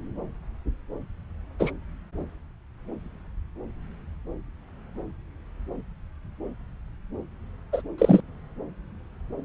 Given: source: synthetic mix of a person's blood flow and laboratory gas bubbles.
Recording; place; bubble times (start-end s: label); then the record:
Doppler ultrasound of blood flow; subclavian vein
1.59-1.71 s: bubbles
7.72-7.81 s: bubbles
7.98-8.21 s: bubbles
From the record:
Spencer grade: 2 (many but less than half of the cardiac periods contain bubble signals, singularly or in groups); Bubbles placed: anywhere in the cardiac cycle